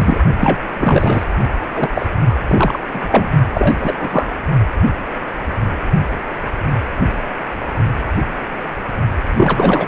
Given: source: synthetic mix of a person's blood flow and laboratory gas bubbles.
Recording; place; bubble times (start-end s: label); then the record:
Doppler ultrasound of blood flow; precordium
0.00-0.19 s: bubbles
0.40-0.62 s: bubbles
0.78-1.24 s: bubbles
1.73-1.90 s: bubbles
1.95-2.07 s: bubbles
2.29-2.34 s: bubbles
2.48-2.79 s: bubbles
2.93-3.31 s: bubbles
3.54-4.30 s: bubbles
9.37-9.88 s: bubbles
From the record:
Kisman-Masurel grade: 333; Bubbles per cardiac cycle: rolling drumbeat, 9 or more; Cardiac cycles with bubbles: 50 to 99%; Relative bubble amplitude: loud (0.450 to 0.775); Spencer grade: 3 (all of the cardiac periods contain showers or single bubble signals, but not dominating or overriding the cardiac motion signals); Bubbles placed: only in the low amplitude regions of the cardiac cycle